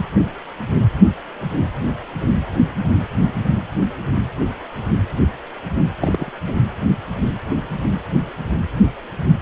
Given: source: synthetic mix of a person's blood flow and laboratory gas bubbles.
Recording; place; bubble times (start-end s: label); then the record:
Doppler ultrasound of blood flow; precordium
5.99-6.41 s: bubbles
6.46-6.54 s: bubbles
From the record:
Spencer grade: 2 (many but less than half of the cardiac periods contain bubble signals, singularly or in groups); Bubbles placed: anywhere in the cardiac cycle